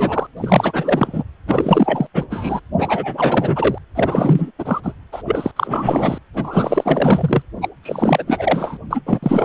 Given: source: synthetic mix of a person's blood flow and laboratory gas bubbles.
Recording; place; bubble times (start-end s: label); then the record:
Doppler ultrasound of blood flow; precordium
0.00-0.27 s: bubbles
0.36-1.23 s: bubbles
1.47-2.06 s: bubbles
2.14-2.24 s: bubbles
2.30-2.60 s: bubbles
2.78-3.78 s: bubbles
3.95-4.51 s: bubbles
4.58-4.80 s: bubbles
4.83-4.93 s: bubbles
5.12-5.22 s: bubbles
5.25-5.51 s: bubbles
5.56-6.18 s: bubbles
6.33-7.42 s: bubbles
7.61-7.69 s: bubbles
7.83-8.24 s: bubbles
8.27-8.78 s: bubbles
8.90-9.02 s: bubbles
9.06-9.20 s: bubbles
9.22-9.45 s: bubbles
From the record:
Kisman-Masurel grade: 444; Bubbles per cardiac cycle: continuous sound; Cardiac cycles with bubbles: 100%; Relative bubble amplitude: maximal (0.775 to 0.999); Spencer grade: 4 (maximum detectable bubble signal sounding continuously throughout systole and diastole of every cardiac period, and overriding the amplitude of the normal cardiac signals); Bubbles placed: anywhere in the cardiac cycle